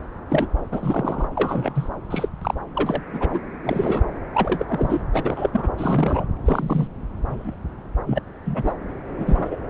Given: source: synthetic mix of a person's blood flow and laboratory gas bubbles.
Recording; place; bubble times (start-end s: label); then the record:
Doppler ultrasound of blood flow; subclavian vein
0.29-0.48 s: bubbles
0.72-1.27 s: bubbles
1.35-1.72 s: bubbles
1.75-1.90 s: bubbles
2.10-2.29 s: bubbles
2.42-2.54 s: bubbles
2.75-3.01 s: bubbles
3.13-3.40 s: bubbles
3.64-4.04 s: bubbles
4.34-5.03 s: bubbles
5.12-5.50 s: bubbles
5.52-5.68 s: bubbles
5.78-6.25 s: bubbles
6.46-6.88 s: bubbles
7.29-7.56 s: bubbles
8.06-8.19 s: bubbles
8.46-8.73 s: bubbles
9.20-9.57 s: bubbles
From the record:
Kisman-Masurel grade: 242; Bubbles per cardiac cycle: several, 3 to 8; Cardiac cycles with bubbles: 100%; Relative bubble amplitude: moderate (0.250 to 0.450); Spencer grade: 3 (all of the cardiac periods contain showers or single bubble signals, but not dominating or overriding the cardiac motion signals); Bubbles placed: anywhere in the cardiac cycle